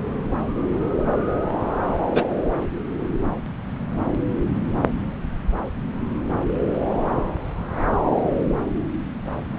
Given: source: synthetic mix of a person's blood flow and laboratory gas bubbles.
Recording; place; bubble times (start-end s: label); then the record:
Doppler ultrasound of blood flow; subclavian vein
2.13-2.26 s: bubbles
From the record:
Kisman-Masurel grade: 113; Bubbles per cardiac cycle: 1 to 2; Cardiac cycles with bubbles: 1 to 10%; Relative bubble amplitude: loud (0.450 to 0.775); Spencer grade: 1 (occasional bubble signal discernible with the cardiac motion signal, with majority of cardiac periods free of bubbles); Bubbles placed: anywhere in the cardiac cycle